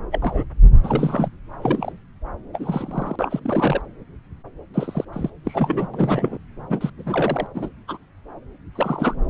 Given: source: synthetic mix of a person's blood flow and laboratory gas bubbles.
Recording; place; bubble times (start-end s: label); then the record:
Doppler ultrasound of blood flow; subclavian vein
0.11-0.45 s: bubbles
0.81-1.29 s: bubbles
1.62-1.93 s: bubbles
2.53-3.16 s: bubbles
3.19-3.40 s: bubbles
3.42-3.81 s: bubbles
4.74-5.05 s: bubbles
5.12-5.30 s: bubbles
5.44-6.38 s: bubbles
6.69-6.90 s: bubbles
6.97-7.46 s: bubbles
7.54-7.69 s: bubbles
7.87-7.98 s: bubbles
8.75-9.16 s: bubbles
From the record:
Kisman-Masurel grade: 232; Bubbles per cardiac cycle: several, 3 to 8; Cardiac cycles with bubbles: 50 to 99%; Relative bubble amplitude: moderate (0.250 to 0.450); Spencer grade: 3 (all of the cardiac periods contain showers or single bubble signals, but not dominating or overriding the cardiac motion signals); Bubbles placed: anywhere in the cardiac cycle